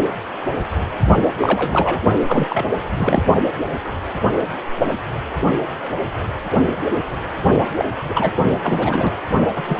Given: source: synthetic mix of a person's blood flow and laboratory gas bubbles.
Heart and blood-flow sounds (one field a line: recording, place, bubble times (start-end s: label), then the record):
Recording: Doppler ultrasound of blood flow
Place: precordium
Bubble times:
1.21-1.28 s: bubbles
1.40-2.01 s: bubbles
2.28-2.46 s: bubbles
2.50-2.65 s: bubbles
2.95-3.23 s: bubbles
7.77-7.85 s: bubbles
8.09-8.31 s: bubbles
8.63-9.19 s: bubbles
9.55-9.80 s: bubbles
From the record:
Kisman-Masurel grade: 332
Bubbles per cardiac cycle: rolling drumbeat, 9 or more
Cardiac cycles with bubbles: 50 to 99%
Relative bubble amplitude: moderate (0.250 to 0.450)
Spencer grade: 3 (all of the cardiac periods contain showers or single bubble signals, but not dominating or overriding the cardiac motion signals)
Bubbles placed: only in the low amplitude regions of the cardiac cycle